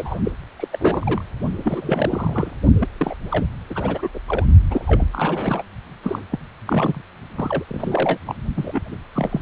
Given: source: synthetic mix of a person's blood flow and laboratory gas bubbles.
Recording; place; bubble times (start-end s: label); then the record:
Doppler ultrasound of blood flow; precordium
0.00-0.18 s: bubbles
0.25-0.32 s: bubbles
0.59-0.68 s: bubbles
0.72-1.23 s: bubbles
1.64-2.51 s: bubbles
2.80-2.88 s: bubbles
2.99-3.15 s: bubbles
3.30-3.46 s: bubbles
3.70-4.08 s: bubbles
4.14-4.20 s: bubbles
4.27-4.46 s: bubbles
4.69-5.63 s: bubbles
6.03-6.23 s: bubbles
6.32-6.39 s: bubbles
6.66-7.02 s: bubbles
7.36-7.64 s: bubbles
7.69-8.19 s: bubbles
8.26-8.35 s: bubbles
8.55-8.80 s: bubbles
8.88-8.96 s: bubbles
9.14-9.41 s: bubbles
From the record:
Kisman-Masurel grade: 342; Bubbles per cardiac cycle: rolling drumbeat, 9 or more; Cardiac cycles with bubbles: 100%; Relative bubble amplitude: moderate (0.250 to 0.450); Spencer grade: 3 (all of the cardiac periods contain showers or single bubble signals, but not dominating or overriding the cardiac motion signals); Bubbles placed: only in the low amplitude regions of the cardiac cycle